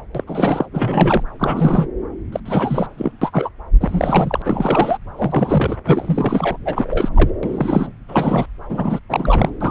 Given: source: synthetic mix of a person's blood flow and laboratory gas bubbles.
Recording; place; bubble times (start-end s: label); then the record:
Doppler ultrasound of blood flow; subclavian vein
0.14-0.24 s: bubbles
0.27-0.66 s: bubbles
0.72-1.22 s: bubbles
1.40-1.88 s: bubbles
2.32-2.40 s: bubbles
2.45-2.87 s: bubbles
2.97-3.12 s: bubbles
3.22-3.49 s: bubbles
3.80-4.42 s: bubbles
4.44-4.97 s: bubbles
5.16-5.76 s: bubbles
5.85-6.57 s: bubbles
6.64-7.09 s: bubbles
7.14-7.30 s: bubbles
7.43-7.89 s: bubbles
8.09-8.46 s: bubbles
8.69-8.99 s: bubbles
9.09-9.50 s: bubbles
9.61-9.71 s: bubbles
From the record:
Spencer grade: 3 (all of the cardiac periods contain showers or single bubble signals, but not dominating or overriding the cardiac motion signals); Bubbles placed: anywhere in the cardiac cycle